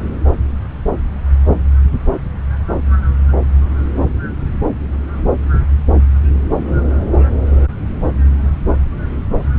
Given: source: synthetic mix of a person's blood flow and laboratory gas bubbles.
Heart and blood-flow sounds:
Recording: Doppler ultrasound of blood flow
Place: subclavian vein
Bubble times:
no bubbles
From the record:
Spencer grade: 0 (complete lack of bubble signals)

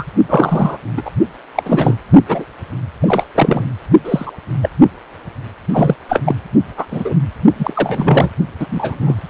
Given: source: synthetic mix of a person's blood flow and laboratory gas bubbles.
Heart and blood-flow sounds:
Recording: Doppler ultrasound of blood flow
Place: precordium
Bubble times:
0.00-0.05 s: bubbles
0.28-0.78 s: bubbles
0.96-1.02 s: bubbles
1.05-1.10 s: bubbles
1.56-1.95 s: bubbles
2.28-2.45 s: bubbles
3.00-3.23 s: bubbles
3.35-3.65 s: bubbles
4.04-4.32 s: bubbles
4.61-4.69 s: bubbles
5.71-5.96 s: bubbles
6.08-6.22 s: bubbles
6.25-6.35 s: bubbles
6.76-6.85 s: bubbles
6.90-7.16 s: bubbles
7.58-8.30 s: bubbles
8.59-9.21 s: bubbles
From the record:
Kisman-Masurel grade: 243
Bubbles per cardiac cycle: several, 3 to 8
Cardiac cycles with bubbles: 100%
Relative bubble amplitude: loud (0.450 to 0.775)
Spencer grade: 3 (all of the cardiac periods contain showers or single bubble signals, but not dominating or overriding the cardiac motion signals)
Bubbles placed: only in the low amplitude regions of the cardiac cycle

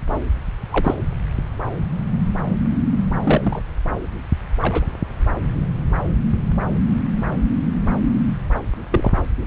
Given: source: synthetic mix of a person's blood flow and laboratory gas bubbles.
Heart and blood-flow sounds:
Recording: Doppler ultrasound of blood flow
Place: subclavian vein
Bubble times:
0.71-0.94 s: bubbles
3.23-3.62 s: bubbles
4.61-4.86 s: bubbles
8.91-9.11 s: bubbles
From the record:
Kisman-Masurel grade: 122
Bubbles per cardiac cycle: 1 to 2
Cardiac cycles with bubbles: 10 to 50%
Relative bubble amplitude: moderate (0.250 to 0.450)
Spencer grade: 2 (many but less than half of the cardiac periods contain bubble signals, singularly or in groups)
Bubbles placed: anywhere in the cardiac cycle

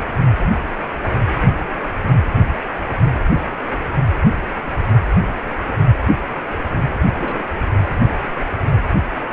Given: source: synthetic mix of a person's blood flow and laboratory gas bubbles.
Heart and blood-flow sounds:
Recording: Doppler ultrasound of blood flow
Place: precordium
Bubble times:
7.14-7.51 s: bubbles
From the record:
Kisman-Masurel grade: 211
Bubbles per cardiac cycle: several, 3 to 8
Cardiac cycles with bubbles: 1 to 10%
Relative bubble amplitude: barely perceptible (0.100 to 0.250)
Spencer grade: 1 (occasional bubble signal discernible with the cardiac motion signal, with majority of cardiac periods free of bubbles)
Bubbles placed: anywhere in the cardiac cycle

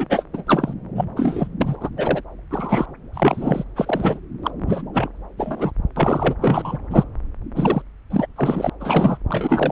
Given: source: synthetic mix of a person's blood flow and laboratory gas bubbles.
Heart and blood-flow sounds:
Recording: Doppler ultrasound of blood flow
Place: subclavian vein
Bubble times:
0.00-0.06 s: bubbles
0.09-0.24 s: bubbles
0.33-0.44 s: bubbles
0.46-0.73 s: bubbles
0.95-1.05 s: bubbles
1.16-1.47 s: bubbles
1.60-1.76 s: bubbles
1.80-1.90 s: bubbles
1.96-2.22 s: bubbles
2.50-2.85 s: bubbles
3.13-3.64 s: bubbles
3.76-4.19 s: bubbles
4.43-4.51 s: bubbles
4.67-4.82 s: bubbles
4.93-5.09 s: bubbles
5.37-5.72 s: bubbles
5.96-6.35 s: bubbles
6.41-6.78 s: bubbles
6.90-7.04 s: bubbles
7.55-7.82 s: bubbles
8.10-8.27 s: bubbles
8.36-8.70 s: bubbles
8.80-9.18 s: bubbles
9.28-9.72 s: bubbles
From the record:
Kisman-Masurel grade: 233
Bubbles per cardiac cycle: several, 3 to 8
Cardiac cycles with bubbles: 50 to 99%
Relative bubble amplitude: loud (0.450 to 0.775)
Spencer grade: 3 (all of the cardiac periods contain showers or single bubble signals, but not dominating or overriding the cardiac motion signals)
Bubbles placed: anywhere in the cardiac cycle

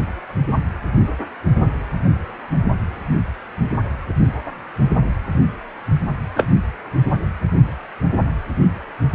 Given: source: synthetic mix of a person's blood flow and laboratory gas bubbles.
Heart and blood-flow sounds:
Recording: Doppler ultrasound of blood flow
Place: precordium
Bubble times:
6.34-6.46 s: bubbles
From the record:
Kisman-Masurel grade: 123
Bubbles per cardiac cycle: 1 to 2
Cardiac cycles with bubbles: 10 to 50%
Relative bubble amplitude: loud (0.450 to 0.775)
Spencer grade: 2 (many but less than half of the cardiac periods contain bubble signals, singularly or in groups)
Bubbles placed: anywhere in the cardiac cycle

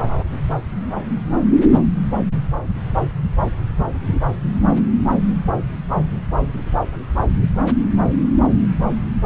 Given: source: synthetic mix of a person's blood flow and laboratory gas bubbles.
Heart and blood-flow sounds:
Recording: Doppler ultrasound of blood flow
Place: subclavian vein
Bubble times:
no bubbles
From the record:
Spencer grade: 0 (complete lack of bubble signals)

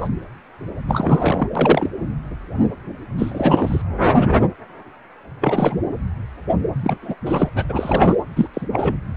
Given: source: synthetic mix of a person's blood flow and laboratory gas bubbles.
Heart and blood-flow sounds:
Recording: Doppler ultrasound of blood flow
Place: precordium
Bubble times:
0.00-0.08 s: bubbles
0.88-1.48 s: bubbles
1.55-1.88 s: bubbles
3.17-3.82 s: bubbles
5.40-5.79 s: bubbles
6.81-6.98 s: bubbles
7.02-7.15 s: bubbles
7.26-7.49 s: bubbles
7.54-7.65 s: bubbles
7.69-8.16 s: bubbles
8.36-8.47 s: bubbles
8.54-8.67 s: bubbles
8.72-8.96 s: bubbles
From the record:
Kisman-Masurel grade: 333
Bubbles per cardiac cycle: rolling drumbeat, 9 or more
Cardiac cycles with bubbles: 50 to 99%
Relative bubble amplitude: loud (0.450 to 0.775)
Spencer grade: 3 (all of the cardiac periods contain showers or single bubble signals, but not dominating or overriding the cardiac motion signals)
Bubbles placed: anywhere in the cardiac cycle

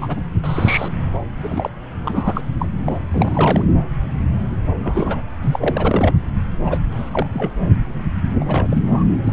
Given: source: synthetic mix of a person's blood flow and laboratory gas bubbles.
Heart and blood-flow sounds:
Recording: Doppler ultrasound of blood flow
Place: subclavian vein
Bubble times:
0.01-0.21 s: bubbles
0.44-0.93 s: bubbles
1.36-1.70 s: bubbles
2.05-2.42 s: bubbles
2.59-2.67 s: bubbles
2.86-2.98 s: bubbles
3.12-3.64 s: bubbles
4.79-5.22 s: bubbles
5.42-6.15 s: bubbles
6.64-6.79 s: bubbles
6.91-7.27 s: bubbles
7.33-7.53 s: bubbles
8.40-8.45 s: bubbles
8.48-8.82 s: bubbles
8.86-9.04 s: bubbles
9.23-9.32 s: bubbles
From the record:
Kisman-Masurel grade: 232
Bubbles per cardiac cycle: several, 3 to 8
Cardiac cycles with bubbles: 50 to 99%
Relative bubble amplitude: moderate (0.250 to 0.450)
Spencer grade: 3 (all of the cardiac periods contain showers or single bubble signals, but not dominating or overriding the cardiac motion signals)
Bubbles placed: anywhere in the cardiac cycle

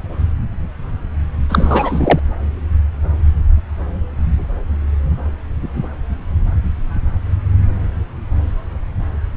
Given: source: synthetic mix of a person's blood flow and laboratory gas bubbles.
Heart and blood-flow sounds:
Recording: Doppler ultrasound of blood flow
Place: subclavian vein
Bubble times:
1.49-2.20 s: bubbles
From the record:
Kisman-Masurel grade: 213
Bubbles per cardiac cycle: several, 3 to 8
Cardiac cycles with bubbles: 1 to 10%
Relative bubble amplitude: loud (0.450 to 0.775)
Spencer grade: 1 (occasional bubble signal discernible with the cardiac motion signal, with majority of cardiac periods free of bubbles)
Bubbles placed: anywhere in the cardiac cycle

